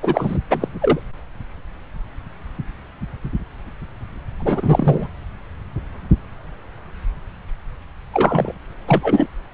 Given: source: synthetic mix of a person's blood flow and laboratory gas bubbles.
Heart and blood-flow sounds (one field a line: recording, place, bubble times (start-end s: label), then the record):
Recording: Doppler ultrasound of blood flow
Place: subclavian vein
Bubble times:
0.02-0.39 s: bubbles
0.50-0.68 s: bubbles
0.81-1.01 s: bubbles
4.39-5.07 s: bubbles
8.13-8.54 s: bubbles
8.87-9.28 s: bubbles
From the record:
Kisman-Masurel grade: 223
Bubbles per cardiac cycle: several, 3 to 8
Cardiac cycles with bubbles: 10 to 50%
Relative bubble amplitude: loud (0.450 to 0.775)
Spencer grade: 2 (many but less than half of the cardiac periods contain bubble signals, singularly or in groups)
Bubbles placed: anywhere in the cardiac cycle